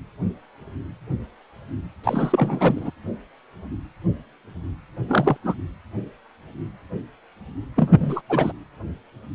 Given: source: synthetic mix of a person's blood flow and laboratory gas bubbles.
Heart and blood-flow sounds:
Doppler ultrasound of blood flow; precordium
2.04-2.91 s: bubbles
5.08-5.37 s: bubbles
5.43-5.54 s: bubbles
7.76-8.21 s: bubbles
8.29-8.53 s: bubbles
From the record:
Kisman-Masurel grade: 223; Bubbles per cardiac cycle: several, 3 to 8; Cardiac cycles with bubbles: 10 to 50%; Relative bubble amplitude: loud (0.450 to 0.775); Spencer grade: 2 (many but less than half of the cardiac periods contain bubble signals, singularly or in groups); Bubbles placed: anywhere in the cardiac cycle

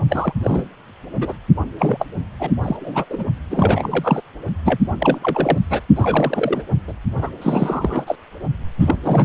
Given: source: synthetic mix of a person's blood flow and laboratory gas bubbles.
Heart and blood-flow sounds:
Doppler ultrasound of blood flow; precordium
0.10-0.33 s: bubbles
0.41-0.65 s: bubbles
1.21-1.36 s: bubbles
1.78-2.05 s: bubbles
2.39-2.51 s: bubbles
2.63-2.77 s: bubbles
2.80-3.05 s: bubbles
3.09-3.25 s: bubbles
3.50-4.21 s: bubbles
4.64-4.80 s: bubbles
4.98-5.19 s: bubbles
5.22-5.58 s: bubbles
5.70-5.82 s: bubbles
5.95-6.63 s: bubbles
6.88-6.93 s: bubbles
7.14-7.31 s: bubbles
7.41-8.15 s: bubbles
8.79-8.96 s: bubbles
9.04-9.25 s: bubbles
From the record:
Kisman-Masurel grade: 342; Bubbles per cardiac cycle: rolling drumbeat, 9 or more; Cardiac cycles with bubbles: 100%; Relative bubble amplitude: moderate (0.250 to 0.450); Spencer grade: 3 (all of the cardiac periods contain showers or single bubble signals, but not dominating or overriding the cardiac motion signals); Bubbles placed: only in the low amplitude regions of the cardiac cycle

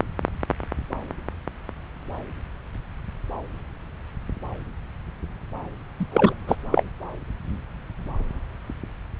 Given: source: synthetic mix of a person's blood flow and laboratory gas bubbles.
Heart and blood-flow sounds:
Doppler ultrasound of blood flow; subclavian vein
6.00-6.06 s: bubbles
6.12-6.34 s: bubbles
6.48-6.56 s: bubbles
6.72-6.83 s: bubbles
From the record:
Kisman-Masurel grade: 222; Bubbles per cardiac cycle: several, 3 to 8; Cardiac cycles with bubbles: 10 to 50%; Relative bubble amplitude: moderate (0.250 to 0.450); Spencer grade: 2 (many but less than half of the cardiac periods contain bubble signals, singularly or in groups); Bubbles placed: anywhere in the cardiac cycle

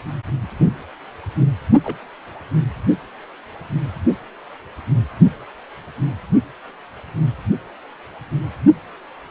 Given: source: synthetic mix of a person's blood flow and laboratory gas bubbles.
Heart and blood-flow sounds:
Doppler ultrasound of blood flow; precordium
1.84-1.99 s: bubbles
From the record:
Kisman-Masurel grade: 121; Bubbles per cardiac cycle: 1 to 2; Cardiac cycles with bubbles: 10 to 50%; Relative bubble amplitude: barely perceptible (0.100 to 0.250); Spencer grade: 2 (many but less than half of the cardiac periods contain bubble signals, singularly or in groups); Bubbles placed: only in the low amplitude regions of the cardiac cycle

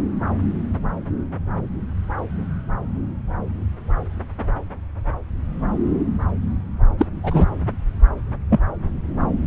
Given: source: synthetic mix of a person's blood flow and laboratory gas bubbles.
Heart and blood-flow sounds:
Doppler ultrasound of blood flow; subclavian vein
6.98-7.06 s: bubbles
7.23-7.46 s: bubbles
8.50-8.60 s: bubbles
From the record:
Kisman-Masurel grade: 113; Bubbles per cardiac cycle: 1 to 2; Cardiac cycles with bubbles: 1 to 10%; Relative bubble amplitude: loud (0.450 to 0.775); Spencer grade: 1 (occasional bubble signal discernible with the cardiac motion signal, with majority of cardiac periods free of bubbles); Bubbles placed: anywhere in the cardiac cycle

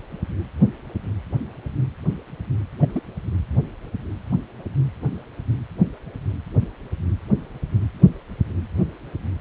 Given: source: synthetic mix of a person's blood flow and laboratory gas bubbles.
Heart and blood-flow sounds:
Doppler ultrasound of blood flow; precordium
2.82-2.86 s: bubbles
2.93-3.02 s: bubbles
From the record:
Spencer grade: 1 (occasional bubble signal discernible with the cardiac motion signal, with majority of cardiac periods free of bubbles); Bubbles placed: anywhere in the cardiac cycle

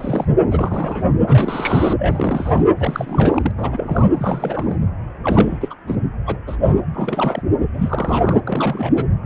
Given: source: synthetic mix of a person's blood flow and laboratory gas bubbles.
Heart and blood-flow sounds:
Doppler ultrasound of blood flow; precordium
0.00-0.27 s: bubbles
0.51-1.03 s: bubbles
1.27-1.94 s: bubbles
1.98-2.64 s: bubbles
2.77-3.52 s: bubbles
3.58-4.08 s: bubbles
4.14-4.76 s: bubbles
5.23-5.74 s: bubbles
5.87-5.96 s: bubbles
6.26-6.37 s: bubbles
6.46-6.77 s: bubbles
6.93-7.42 s: bubbles
7.74-8.40 s: bubbles
8.47-9.06 s: bubbles
From the record:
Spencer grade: 3 (all of the cardiac periods contain showers or single bubble signals, but not dominating or overriding the cardiac motion signals); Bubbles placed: anywhere in the cardiac cycle

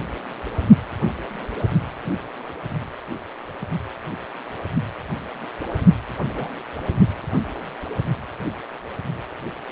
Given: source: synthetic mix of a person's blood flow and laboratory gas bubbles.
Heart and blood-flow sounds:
Doppler ultrasound of blood flow; precordium
6.27-6.49 s: bubbles
From the record:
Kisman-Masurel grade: 211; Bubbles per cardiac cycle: several, 3 to 8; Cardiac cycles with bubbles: 1 to 10%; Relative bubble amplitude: barely perceptible (0.100 to 0.250); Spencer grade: 1 (occasional bubble signal discernible with the cardiac motion signal, with majority of cardiac periods free of bubbles); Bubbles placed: only in the low amplitude regions of the cardiac cycle

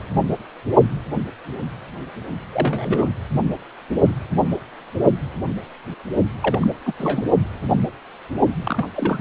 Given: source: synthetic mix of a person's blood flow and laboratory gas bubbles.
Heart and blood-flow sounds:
Doppler ultrasound of blood flow; precordium
2.52-3.08 s: bubbles
6.42-6.71 s: bubbles
6.85-6.93 s: bubbles
6.97-7.23 s: bubbles
8.65-8.89 s: bubbles
8.96-9.21 s: bubbles
From the record:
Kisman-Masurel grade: 222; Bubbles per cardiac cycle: several, 3 to 8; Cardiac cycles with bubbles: 10 to 50%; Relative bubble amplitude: moderate (0.250 to 0.450); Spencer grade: 2 (many but less than half of the cardiac periods contain bubble signals, singularly or in groups); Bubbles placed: only in the low amplitude regions of the cardiac cycle

